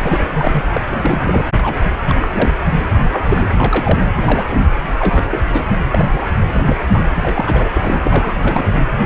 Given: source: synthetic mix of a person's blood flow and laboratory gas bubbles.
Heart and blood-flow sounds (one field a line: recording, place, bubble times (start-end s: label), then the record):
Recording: Doppler ultrasound of blood flow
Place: precordium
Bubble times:
0.03-0.20 s: bubbles
0.32-0.63 s: bubbles
0.74-0.81 s: bubbles
0.86-1.42 s: bubbles
1.57-1.76 s: bubbles
1.81-1.91 s: bubbles
2.08-2.28 s: bubbles
2.32-2.54 s: bubbles
3.11-3.50 s: bubbles
3.59-4.01 s: bubbles
4.16-4.66 s: bubbles
5.00-5.27 s: bubbles
5.30-5.43 s: bubbles
5.52-5.64 s: bubbles
5.88-6.27 s: bubbles
6.54-6.76 s: bubbles
6.92-7.02 s: bubbles
7.14-7.71 s: bubbles
7.73-8.36 s: bubbles
8.40-8.85 s: bubbles
9.00-9.06 s: bubbles
From the record:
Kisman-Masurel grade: 242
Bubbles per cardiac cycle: several, 3 to 8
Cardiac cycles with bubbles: 100%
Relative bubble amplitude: moderate (0.250 to 0.450)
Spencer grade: 3 (all of the cardiac periods contain showers or single bubble signals, but not dominating or overriding the cardiac motion signals)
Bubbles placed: anywhere in the cardiac cycle